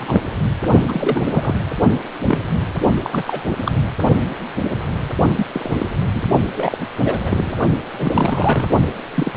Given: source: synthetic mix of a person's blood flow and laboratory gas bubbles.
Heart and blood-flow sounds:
Doppler ultrasound of blood flow; precordium
0.00-0.21 s: bubbles
0.88-1.22 s: bubbles
1.31-1.54 s: bubbles
2.27-2.38 s: bubbles
3.03-3.22 s: bubbles
3.25-3.44 s: bubbles
3.66-3.92 s: bubbles
5.37-5.47 s: bubbles
5.54-5.85 s: bubbles
6.14-6.23 s: bubbles
6.55-6.87 s: bubbles
7.04-7.53 s: bubbles
7.99-8.69 s: bubbles
9.16-9.33 s: bubbles
From the record:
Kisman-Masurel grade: 232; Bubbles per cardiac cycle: several, 3 to 8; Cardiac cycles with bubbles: 50 to 99%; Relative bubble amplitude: moderate (0.250 to 0.450); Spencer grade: 3 (all of the cardiac periods contain showers or single bubble signals, but not dominating or overriding the cardiac motion signals); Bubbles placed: only in the low amplitude regions of the cardiac cycle

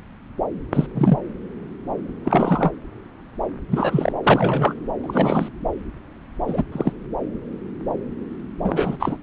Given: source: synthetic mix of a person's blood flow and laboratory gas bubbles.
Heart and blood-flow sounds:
Doppler ultrasound of blood flow; subclavian vein
0.73-0.86 s: bubbles
0.95-1.17 s: bubbles
2.25-2.72 s: bubbles
3.70-4.12 s: bubbles
4.23-4.73 s: bubbles
5.03-5.49 s: bubbles
6.47-6.62 s: bubbles
6.72-6.93 s: bubbles
8.64-8.96 s: bubbles
8.99-9.17 s: bubbles
From the record:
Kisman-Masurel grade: 222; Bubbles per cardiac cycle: several, 3 to 8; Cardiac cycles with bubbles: 10 to 50%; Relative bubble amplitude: moderate (0.250 to 0.450); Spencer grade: 2 (many but less than half of the cardiac periods contain bubble signals, singularly or in groups); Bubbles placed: anywhere in the cardiac cycle

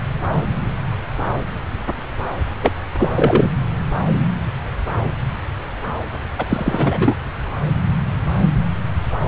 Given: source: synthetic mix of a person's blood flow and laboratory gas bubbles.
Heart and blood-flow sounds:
Doppler ultrasound of blood flow; subclavian vein
2.62-2.72 s: bubbles
2.98-3.50 s: bubbles
6.38-7.17 s: bubbles
From the record:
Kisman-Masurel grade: 223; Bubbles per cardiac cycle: several, 3 to 8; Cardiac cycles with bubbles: 10 to 50%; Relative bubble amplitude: loud (0.450 to 0.775); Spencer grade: 2 (many but less than half of the cardiac periods contain bubble signals, singularly or in groups); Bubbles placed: anywhere in the cardiac cycle

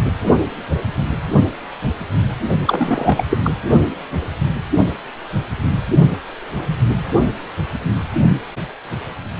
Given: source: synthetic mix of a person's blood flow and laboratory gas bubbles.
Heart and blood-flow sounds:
Doppler ultrasound of blood flow; precordium
2.65-3.23 s: bubbles
3.30-3.38 s: bubbles
3.44-3.50 s: bubbles
From the record:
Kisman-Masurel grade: 213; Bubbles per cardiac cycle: several, 3 to 8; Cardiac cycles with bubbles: 1 to 10%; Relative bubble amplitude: loud (0.450 to 0.775); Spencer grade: 1 (occasional bubble signal discernible with the cardiac motion signal, with majority of cardiac periods free of bubbles); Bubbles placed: only in the low amplitude regions of the cardiac cycle

